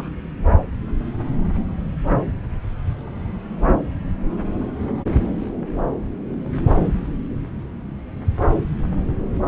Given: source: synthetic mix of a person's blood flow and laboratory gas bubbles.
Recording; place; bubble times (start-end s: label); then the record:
Doppler ultrasound of blood flow; subclavian vein
0.00-0.10 s: bubbles
From the record:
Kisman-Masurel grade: 211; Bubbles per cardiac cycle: several, 3 to 8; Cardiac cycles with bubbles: 1 to 10%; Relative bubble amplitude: barely perceptible (0.100 to 0.250); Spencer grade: 1 (occasional bubble signal discernible with the cardiac motion signal, with majority of cardiac periods free of bubbles); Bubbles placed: anywhere in the cardiac cycle